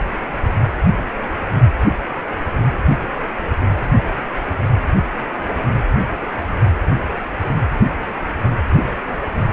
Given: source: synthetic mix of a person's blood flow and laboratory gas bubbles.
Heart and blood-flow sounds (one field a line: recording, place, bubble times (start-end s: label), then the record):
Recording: Doppler ultrasound of blood flow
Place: precordium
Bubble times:
no bubbles
From the record:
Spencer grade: 0 (complete lack of bubble signals)